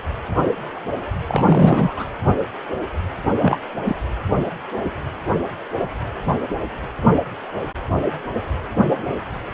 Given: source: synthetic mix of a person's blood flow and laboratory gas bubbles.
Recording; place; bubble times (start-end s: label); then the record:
Doppler ultrasound of blood flow; precordium
1.28-2.06 s: bubbles
3.41-3.60 s: bubbles
3.85-3.94 s: bubbles
From the record:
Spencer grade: 2 (many but less than half of the cardiac periods contain bubble signals, singularly or in groups); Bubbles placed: anywhere in the cardiac cycle